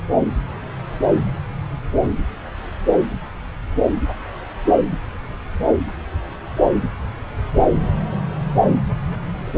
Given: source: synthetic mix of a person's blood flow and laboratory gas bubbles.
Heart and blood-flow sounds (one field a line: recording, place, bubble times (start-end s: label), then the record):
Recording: Doppler ultrasound of blood flow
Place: subclavian vein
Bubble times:
0.00-0.03 s: bubbles
0.15-0.20 s: bubbles
From the record:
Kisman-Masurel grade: 211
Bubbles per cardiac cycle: several, 3 to 8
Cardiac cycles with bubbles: 1 to 10%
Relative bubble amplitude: barely perceptible (0.100 to 0.250)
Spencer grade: 1 (occasional bubble signal discernible with the cardiac motion signal, with majority of cardiac periods free of bubbles)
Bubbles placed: anywhere in the cardiac cycle